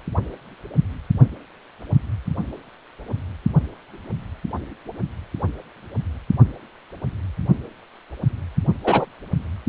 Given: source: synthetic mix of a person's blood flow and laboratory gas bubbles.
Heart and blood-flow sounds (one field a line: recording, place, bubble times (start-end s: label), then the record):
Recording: Doppler ultrasound of blood flow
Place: precordium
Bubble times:
8.84-9.06 s: bubbles
From the record:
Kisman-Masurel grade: 113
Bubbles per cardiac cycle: 1 to 2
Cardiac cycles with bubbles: 1 to 10%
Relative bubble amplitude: loud (0.450 to 0.775)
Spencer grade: 1 (occasional bubble signal discernible with the cardiac motion signal, with majority of cardiac periods free of bubbles)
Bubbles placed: only in the low amplitude regions of the cardiac cycle